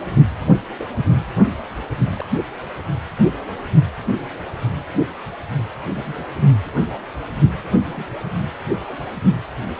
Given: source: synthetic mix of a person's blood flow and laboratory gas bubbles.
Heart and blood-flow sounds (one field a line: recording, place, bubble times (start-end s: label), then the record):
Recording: Doppler ultrasound of blood flow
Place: precordium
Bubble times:
0.76-0.88 s: bubbles
2.17-2.25 s: bubbles
2.30-2.41 s: bubbles
5.94-6.23 s: bubbles
7.84-8.06 s: bubbles
8.86-8.96 s: bubbles
From the record:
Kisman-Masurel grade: 121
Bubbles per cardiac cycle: 1 to 2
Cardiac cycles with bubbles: 10 to 50%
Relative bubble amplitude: barely perceptible (0.100 to 0.250)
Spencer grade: 2 (many but less than half of the cardiac periods contain bubble signals, singularly or in groups)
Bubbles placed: anywhere in the cardiac cycle